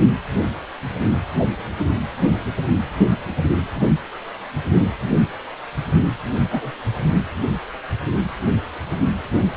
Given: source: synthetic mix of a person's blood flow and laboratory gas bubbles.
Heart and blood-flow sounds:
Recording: Doppler ultrasound of blood flow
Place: precordium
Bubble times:
6.52-6.72 s: bubbles
From the record:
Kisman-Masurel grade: 111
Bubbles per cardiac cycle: 1 to 2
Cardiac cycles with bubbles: 1 to 10%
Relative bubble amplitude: barely perceptible (0.100 to 0.250)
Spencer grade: 1 (occasional bubble signal discernible with the cardiac motion signal, with majority of cardiac periods free of bubbles)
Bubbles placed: anywhere in the cardiac cycle

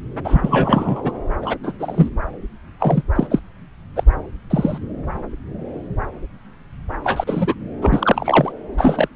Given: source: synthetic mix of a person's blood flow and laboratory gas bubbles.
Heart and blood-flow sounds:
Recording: Doppler ultrasound of blood flow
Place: subclavian vein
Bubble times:
0.24-1.12 s: bubbles
1.42-1.57 s: bubbles
1.63-1.72 s: bubbles
1.80-2.08 s: bubbles
2.79-3.02 s: bubbles
3.15-3.27 s: bubbles
3.30-3.39 s: bubbles
3.96-4.04 s: bubbles
4.50-4.78 s: bubbles
7.04-7.54 s: bubbles
7.81-8.52 s: bubbles
8.77-9.08 s: bubbles
From the record:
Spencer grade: 3 (all of the cardiac periods contain showers or single bubble signals, but not dominating or overriding the cardiac motion signals)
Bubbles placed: anywhere in the cardiac cycle

